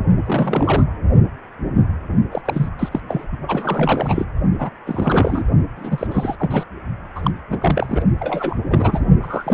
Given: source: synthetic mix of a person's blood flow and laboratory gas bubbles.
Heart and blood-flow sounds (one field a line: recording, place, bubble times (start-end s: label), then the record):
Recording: Doppler ultrasound of blood flow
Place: precordium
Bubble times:
0.25-0.85 s: bubbles
2.31-2.42 s: bubbles
2.45-2.69 s: bubbles
2.79-3.00 s: bubbles
3.08-3.27 s: bubbles
3.32-3.38 s: bubbles
3.48-4.25 s: bubbles
4.58-4.70 s: bubbles
4.86-5.44 s: bubbles
5.76-6.07 s: bubbles
6.11-6.36 s: bubbles
6.39-6.63 s: bubbles
7.15-7.31 s: bubbles
7.50-8.02 s: bubbles
8.19-8.61 s: bubbles
8.67-8.99 s: bubbles
9.21-9.54 s: bubbles
From the record:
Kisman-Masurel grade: 332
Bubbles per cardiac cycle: rolling drumbeat, 9 or more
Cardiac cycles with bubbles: 50 to 99%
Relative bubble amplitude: moderate (0.250 to 0.450)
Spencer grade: 3 (all of the cardiac periods contain showers or single bubble signals, but not dominating or overriding the cardiac motion signals)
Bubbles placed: only in the low amplitude regions of the cardiac cycle